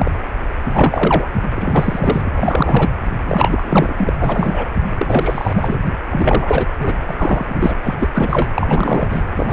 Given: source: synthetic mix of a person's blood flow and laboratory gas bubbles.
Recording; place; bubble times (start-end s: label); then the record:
Doppler ultrasound of blood flow; precordium
0.00-0.11 s: bubbles
0.72-1.30 s: bubbles
1.55-2.21 s: bubbles
2.25-2.29 s: bubbles
2.36-2.89 s: bubbles
3.25-4.13 s: bubbles
4.20-4.66 s: bubbles
4.98-5.80 s: bubbles
6.11-6.67 s: bubbles
6.78-6.93 s: bubbles
7.07-7.14 s: bubbles
7.17-7.76 s: bubbles
7.83-7.96 s: bubbles
7.99-8.07 s: bubbles
8.14-8.47 s: bubbles
8.55-9.21 s: bubbles
9.35-9.53 s: bubbles
From the record:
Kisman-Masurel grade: 333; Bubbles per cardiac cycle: rolling drumbeat, 9 or more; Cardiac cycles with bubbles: 50 to 99%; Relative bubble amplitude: loud (0.450 to 0.775); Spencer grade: 3 (all of the cardiac periods contain showers or single bubble signals, but not dominating or overriding the cardiac motion signals); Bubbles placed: anywhere in the cardiac cycle